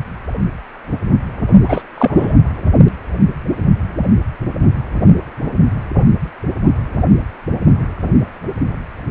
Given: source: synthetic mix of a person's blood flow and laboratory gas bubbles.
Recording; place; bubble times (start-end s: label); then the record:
Doppler ultrasound of blood flow; precordium
1.66-1.82 s: bubbles
1.94-2.36 s: bubbles
From the record:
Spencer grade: 1 (occasional bubble signal discernible with the cardiac motion signal, with majority of cardiac periods free of bubbles); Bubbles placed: anywhere in the cardiac cycle